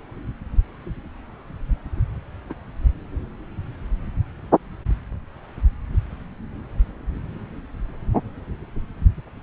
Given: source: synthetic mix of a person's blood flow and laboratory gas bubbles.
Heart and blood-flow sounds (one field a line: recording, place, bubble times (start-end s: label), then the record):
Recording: Doppler ultrasound of blood flow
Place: subclavian vein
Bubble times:
2.49-2.53 s: bubbles
From the record:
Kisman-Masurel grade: 121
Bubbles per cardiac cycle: 1 to 2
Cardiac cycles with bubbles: 10 to 50%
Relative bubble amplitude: barely perceptible (0.100 to 0.250)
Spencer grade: 2 (many but less than half of the cardiac periods contain bubble signals, singularly or in groups)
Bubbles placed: anywhere in the cardiac cycle